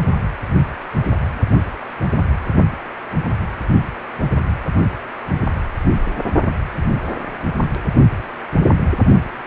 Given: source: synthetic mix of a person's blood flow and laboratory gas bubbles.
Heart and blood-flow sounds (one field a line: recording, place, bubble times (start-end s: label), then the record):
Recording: Doppler ultrasound of blood flow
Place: precordium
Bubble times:
no bubbles
From the record:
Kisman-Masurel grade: 000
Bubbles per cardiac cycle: 0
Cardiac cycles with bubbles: 0%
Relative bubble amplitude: no bubbles discernible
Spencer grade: 0 (complete lack of bubble signals)